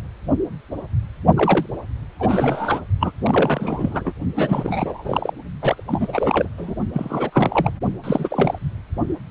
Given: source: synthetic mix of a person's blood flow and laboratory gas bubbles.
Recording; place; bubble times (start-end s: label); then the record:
Doppler ultrasound of blood flow; precordium
1.36-1.66 s: bubbles
2.19-2.81 s: bubbles
3.00-3.11 s: bubbles
3.21-4.12 s: bubbles
4.36-5.32 s: bubbles
5.60-5.83 s: bubbles
5.88-6.49 s: bubbles
6.58-6.75 s: bubbles
6.93-7.30 s: bubbles
7.33-7.71 s: bubbles
8.04-8.58 s: bubbles
From the record:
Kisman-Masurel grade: 332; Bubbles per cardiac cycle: rolling drumbeat, 9 or more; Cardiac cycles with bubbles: 50 to 99%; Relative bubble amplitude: moderate (0.250 to 0.450); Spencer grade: 3 (all of the cardiac periods contain showers or single bubble signals, but not dominating or overriding the cardiac motion signals); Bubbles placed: only in the low amplitude regions of the cardiac cycle